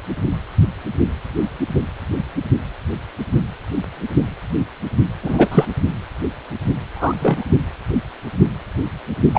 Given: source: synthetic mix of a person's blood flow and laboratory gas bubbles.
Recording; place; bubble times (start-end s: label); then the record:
Doppler ultrasound of blood flow; precordium
5.23-5.48 s: bubbles
5.51-5.66 s: bubbles
6.96-7.45 s: bubbles
9.34-9.39 s: bubbles
From the record:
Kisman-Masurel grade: 223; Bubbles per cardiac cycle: several, 3 to 8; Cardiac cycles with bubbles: 10 to 50%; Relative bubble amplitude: loud (0.450 to 0.775); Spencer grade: 2 (many but less than half of the cardiac periods contain bubble signals, singularly or in groups); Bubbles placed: only in the low amplitude regions of the cardiac cycle